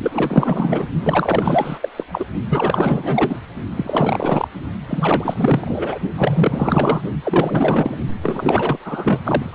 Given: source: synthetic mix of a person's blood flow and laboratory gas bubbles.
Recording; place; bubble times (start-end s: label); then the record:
Doppler ultrasound of blood flow; precordium
0.00-0.89 s: bubbles
1.02-1.79 s: bubbles
1.81-1.89 s: bubbles
1.97-2.05 s: bubbles
2.11-2.25 s: bubbles
2.50-3.40 s: bubbles
3.75-4.48 s: bubbles
4.88-6.00 s: bubbles
6.18-7.02 s: bubbles
7.24-7.98 s: bubbles
8.21-8.78 s: bubbles
8.85-9.21 s: bubbles
9.24-9.55 s: bubbles
From the record:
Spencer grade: 4 (maximum detectable bubble signal sounding continuously throughout systole and diastole of every cardiac period, and overriding the amplitude of the normal cardiac signals); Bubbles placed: only in the low amplitude regions of the cardiac cycle